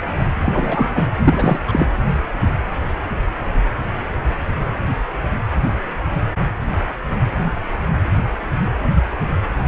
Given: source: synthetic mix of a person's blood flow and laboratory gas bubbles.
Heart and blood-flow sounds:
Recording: Doppler ultrasound of blood flow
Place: precordium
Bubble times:
0.42-1.03 s: bubbles
1.19-1.58 s: bubbles
1.68-1.87 s: bubbles
From the record:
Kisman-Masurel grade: 213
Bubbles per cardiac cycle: several, 3 to 8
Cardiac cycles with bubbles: 1 to 10%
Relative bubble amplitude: loud (0.450 to 0.775)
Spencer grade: 1 (occasional bubble signal discernible with the cardiac motion signal, with majority of cardiac periods free of bubbles)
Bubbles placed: anywhere in the cardiac cycle

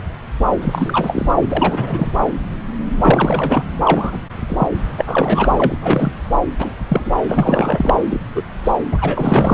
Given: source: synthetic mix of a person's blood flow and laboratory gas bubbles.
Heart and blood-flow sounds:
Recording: Doppler ultrasound of blood flow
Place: subclavian vein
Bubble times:
0.61-1.31 s: bubbles
1.42-2.11 s: bubbles
2.98-3.63 s: bubbles
3.84-4.18 s: bubbles
4.48-4.69 s: bubbles
4.98-5.48 s: bubbles
5.58-5.78 s: bubbles
5.81-6.12 s: bubbles
6.59-6.75 s: bubbles
6.88-7.12 s: bubbles
7.28-7.99 s: bubbles
8.10-8.20 s: bubbles
8.35-8.42 s: bubbles
8.63-8.72 s: bubbles
8.91-9.54 s: bubbles
From the record:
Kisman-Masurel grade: 233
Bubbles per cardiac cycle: several, 3 to 8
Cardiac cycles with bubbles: 50 to 99%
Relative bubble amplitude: loud (0.450 to 0.775)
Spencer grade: 3 (all of the cardiac periods contain showers or single bubble signals, but not dominating or overriding the cardiac motion signals)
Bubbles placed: anywhere in the cardiac cycle

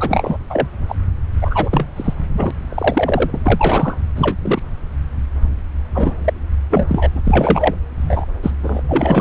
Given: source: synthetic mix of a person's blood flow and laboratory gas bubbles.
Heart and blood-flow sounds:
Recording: Doppler ultrasound of blood flow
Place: subclavian vein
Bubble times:
0.00-0.36 s: bubbles
0.49-0.68 s: bubbles
0.89-0.96 s: bubbles
1.41-1.86 s: bubbles
1.96-2.14 s: bubbles
2.33-2.51 s: bubbles
2.69-3.40 s: bubbles
3.45-3.97 s: bubbles
4.16-4.35 s: bubbles
4.42-4.61 s: bubbles
5.94-6.15 s: bubbles
6.24-6.30 s: bubbles
6.70-7.08 s: bubbles
7.15-7.22 s: bubbles
7.25-7.75 s: bubbles
8.01-8.25 s: bubbles
8.43-8.51 s: bubbles
8.63-8.82 s: bubbles
8.89-9.21 s: bubbles
From the record:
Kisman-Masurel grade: 243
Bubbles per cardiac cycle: several, 3 to 8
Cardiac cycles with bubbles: 100%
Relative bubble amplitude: loud (0.450 to 0.775)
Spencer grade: 3 (all of the cardiac periods contain showers or single bubble signals, but not dominating or overriding the cardiac motion signals)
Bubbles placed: anywhere in the cardiac cycle

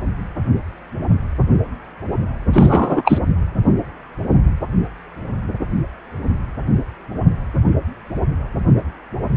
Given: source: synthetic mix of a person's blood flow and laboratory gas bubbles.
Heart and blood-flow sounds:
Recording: Doppler ultrasound of blood flow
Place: precordium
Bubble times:
2.53-3.19 s: bubbles
From the record:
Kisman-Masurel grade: 213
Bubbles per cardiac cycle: several, 3 to 8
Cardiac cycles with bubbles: 1 to 10%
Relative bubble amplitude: loud (0.450 to 0.775)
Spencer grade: 1 (occasional bubble signal discernible with the cardiac motion signal, with majority of cardiac periods free of bubbles)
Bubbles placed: anywhere in the cardiac cycle

